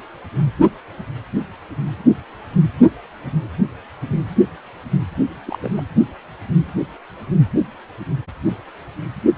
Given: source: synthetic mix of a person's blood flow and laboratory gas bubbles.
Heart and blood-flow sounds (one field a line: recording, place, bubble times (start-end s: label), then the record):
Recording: Doppler ultrasound of blood flow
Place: precordium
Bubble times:
5.46-5.58 s: bubbles
5.62-5.70 s: bubbles
5.78-5.82 s: bubbles
From the record:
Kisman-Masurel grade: 211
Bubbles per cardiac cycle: several, 3 to 8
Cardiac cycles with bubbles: 1 to 10%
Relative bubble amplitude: barely perceptible (0.100 to 0.250)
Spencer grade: 1 (occasional bubble signal discernible with the cardiac motion signal, with majority of cardiac periods free of bubbles)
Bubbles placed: anywhere in the cardiac cycle